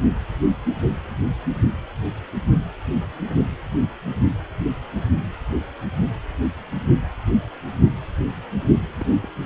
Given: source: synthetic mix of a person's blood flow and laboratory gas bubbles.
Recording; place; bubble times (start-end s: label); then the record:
Doppler ultrasound of blood flow; precordium
9.01-9.05 s: bubbles
9.22-9.29 s: bubbles
From the record:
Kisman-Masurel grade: 111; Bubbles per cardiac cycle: 1 to 2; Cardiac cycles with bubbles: 1 to 10%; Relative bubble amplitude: barely perceptible (0.100 to 0.250); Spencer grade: 1 (occasional bubble signal discernible with the cardiac motion signal, with majority of cardiac periods free of bubbles); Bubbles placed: only in the low amplitude regions of the cardiac cycle